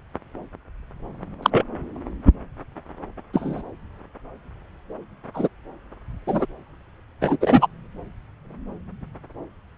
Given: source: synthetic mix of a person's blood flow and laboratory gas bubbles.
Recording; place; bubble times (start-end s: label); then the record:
Doppler ultrasound of blood flow; subclavian vein
1.42-1.65 s: bubbles
3.33-3.62 s: bubbles
5.33-5.48 s: bubbles
6.27-6.46 s: bubbles
7.21-7.36 s: bubbles
7.40-7.67 s: bubbles
From the record:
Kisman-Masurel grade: 123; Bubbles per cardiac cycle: 1 to 2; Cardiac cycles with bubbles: 10 to 50%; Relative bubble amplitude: loud (0.450 to 0.775); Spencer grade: 2 (many but less than half of the cardiac periods contain bubble signals, singularly or in groups); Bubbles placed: anywhere in the cardiac cycle